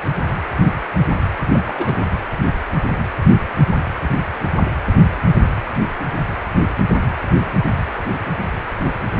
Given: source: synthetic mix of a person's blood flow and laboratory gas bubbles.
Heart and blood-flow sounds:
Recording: Doppler ultrasound of blood flow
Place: precordium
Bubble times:
1.52-2.06 s: bubbles
From the record:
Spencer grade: 1 (occasional bubble signal discernible with the cardiac motion signal, with majority of cardiac periods free of bubbles)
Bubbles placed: anywhere in the cardiac cycle

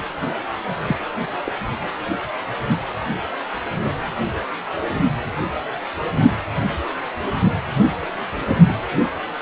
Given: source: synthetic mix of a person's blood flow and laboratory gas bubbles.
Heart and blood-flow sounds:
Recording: Doppler ultrasound of blood flow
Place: precordium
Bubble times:
0.87-0.96 s: bubbles
1.45-1.51 s: bubbles
8.36-8.74 s: bubbles
From the record:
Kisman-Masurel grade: 121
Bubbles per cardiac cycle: 1 to 2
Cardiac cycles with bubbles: 10 to 50%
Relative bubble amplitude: barely perceptible (0.100 to 0.250)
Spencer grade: 2 (many but less than half of the cardiac periods contain bubble signals, singularly or in groups)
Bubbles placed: anywhere in the cardiac cycle

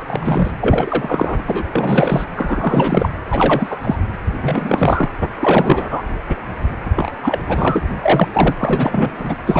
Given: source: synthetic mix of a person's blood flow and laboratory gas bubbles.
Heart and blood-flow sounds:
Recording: Doppler ultrasound of blood flow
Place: precordium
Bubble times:
0.07-0.51 s: bubbles
0.61-1.42 s: bubbles
1.47-1.69 s: bubbles
1.72-2.25 s: bubbles
2.36-3.10 s: bubbles
3.30-3.78 s: bubbles
3.82-3.96 s: bubbles
4.42-5.09 s: bubbles
5.40-6.02 s: bubbles
6.96-7.11 s: bubbles
7.22-7.39 s: bubbles
7.46-7.88 s: bubbles
8.01-8.28 s: bubbles
8.32-8.55 s: bubbles
8.59-9.09 s: bubbles
9.17-9.35 s: bubbles
9.46-9.60 s: bubbles
From the record:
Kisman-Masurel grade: 343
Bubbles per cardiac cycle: rolling drumbeat, 9 or more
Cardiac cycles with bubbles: 100%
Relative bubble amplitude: loud (0.450 to 0.775)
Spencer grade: 3 (all of the cardiac periods contain showers or single bubble signals, but not dominating or overriding the cardiac motion signals)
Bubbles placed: anywhere in the cardiac cycle

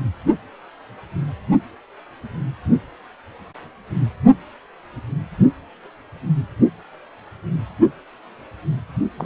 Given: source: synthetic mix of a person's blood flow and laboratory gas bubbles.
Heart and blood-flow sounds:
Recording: Doppler ultrasound of blood flow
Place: precordium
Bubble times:
9.18-9.25 s: bubbles
From the record:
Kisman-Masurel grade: 112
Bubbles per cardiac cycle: 1 to 2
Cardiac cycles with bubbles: 1 to 10%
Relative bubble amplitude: moderate (0.250 to 0.450)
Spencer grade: 1 (occasional bubble signal discernible with the cardiac motion signal, with majority of cardiac periods free of bubbles)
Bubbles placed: only in the low amplitude regions of the cardiac cycle

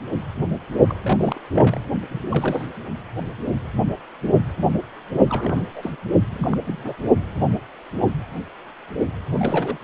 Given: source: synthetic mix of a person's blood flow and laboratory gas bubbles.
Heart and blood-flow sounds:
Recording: Doppler ultrasound of blood flow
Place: precordium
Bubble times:
0.89-0.99 s: bubbles
1.03-1.40 s: bubbles
1.52-1.79 s: bubbles
2.08-2.21 s: bubbles
2.23-2.69 s: bubbles
5.26-5.64 s: bubbles
5.76-5.92 s: bubbles
6.31-6.94 s: bubbles
9.34-9.77 s: bubbles
From the record:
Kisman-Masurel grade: 221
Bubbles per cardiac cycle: several, 3 to 8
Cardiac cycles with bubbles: 10 to 50%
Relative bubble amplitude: barely perceptible (0.100 to 0.250)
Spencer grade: 2 (many but less than half of the cardiac periods contain bubble signals, singularly or in groups)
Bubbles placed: only in the low amplitude regions of the cardiac cycle

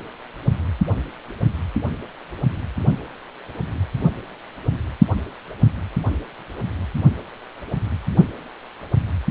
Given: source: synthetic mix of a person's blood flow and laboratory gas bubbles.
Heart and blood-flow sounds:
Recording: Doppler ultrasound of blood flow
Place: precordium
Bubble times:
no bubbles
From the record:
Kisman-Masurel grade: 000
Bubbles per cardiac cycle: 0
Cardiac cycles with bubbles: 0%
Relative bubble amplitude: no bubbles discernible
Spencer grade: 0 (complete lack of bubble signals)

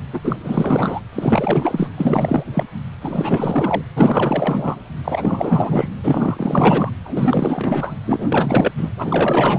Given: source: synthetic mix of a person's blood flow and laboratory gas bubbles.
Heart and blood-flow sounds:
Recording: Doppler ultrasound of blood flow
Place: precordium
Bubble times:
0.13-0.20 s: bubbles
0.24-0.36 s: bubbles
0.42-1.00 s: bubbles
1.13-1.89 s: bubbles
1.97-2.44 s: bubbles
2.54-2.64 s: bubbles
3.01-3.82 s: bubbles
3.95-4.80 s: bubbles
5.04-5.88 s: bubbles
6.03-6.90 s: bubbles
7.04-7.96 s: bubbles
8.04-8.72 s: bubbles
8.77-8.89 s: bubbles
8.96-9.59 s: bubbles
From the record:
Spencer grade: 4 (maximum detectable bubble signal sounding continuously throughout systole and diastole of every cardiac period, and overriding the amplitude of the normal cardiac signals)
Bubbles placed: anywhere in the cardiac cycle

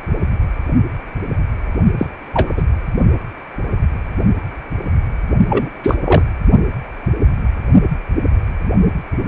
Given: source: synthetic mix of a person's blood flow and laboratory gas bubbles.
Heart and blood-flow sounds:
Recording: Doppler ultrasound of blood flow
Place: precordium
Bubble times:
1.98-2.06 s: bubbles
2.33-2.52 s: bubbles
2.56-2.62 s: bubbles
5.48-5.70 s: bubbles
5.83-5.96 s: bubbles
6.04-6.22 s: bubbles
From the record:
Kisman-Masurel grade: 223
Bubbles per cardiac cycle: several, 3 to 8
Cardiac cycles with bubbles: 10 to 50%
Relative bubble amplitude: loud (0.450 to 0.775)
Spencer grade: 2 (many but less than half of the cardiac periods contain bubble signals, singularly or in groups)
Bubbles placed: only in the low amplitude regions of the cardiac cycle

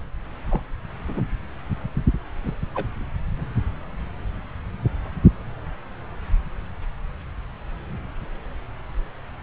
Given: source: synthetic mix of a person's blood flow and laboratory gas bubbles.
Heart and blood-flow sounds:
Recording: Doppler ultrasound of blood flow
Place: subclavian vein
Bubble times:
0.50-0.60 s: bubbles
1.08-1.22 s: bubbles
2.46-2.56 s: bubbles
2.75-2.85 s: bubbles
From the record:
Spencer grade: 2 (many but less than half of the cardiac periods contain bubble signals, singularly or in groups)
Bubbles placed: anywhere in the cardiac cycle

